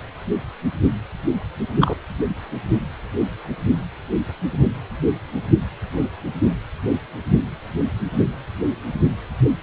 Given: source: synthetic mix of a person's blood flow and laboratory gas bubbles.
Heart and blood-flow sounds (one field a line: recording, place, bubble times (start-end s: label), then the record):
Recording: Doppler ultrasound of blood flow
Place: precordium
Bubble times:
1.80-1.94 s: bubbles
From the record:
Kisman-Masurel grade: 113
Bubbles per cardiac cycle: 1 to 2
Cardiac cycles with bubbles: 1 to 10%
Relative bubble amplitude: loud (0.450 to 0.775)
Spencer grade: 1 (occasional bubble signal discernible with the cardiac motion signal, with majority of cardiac periods free of bubbles)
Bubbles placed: anywhere in the cardiac cycle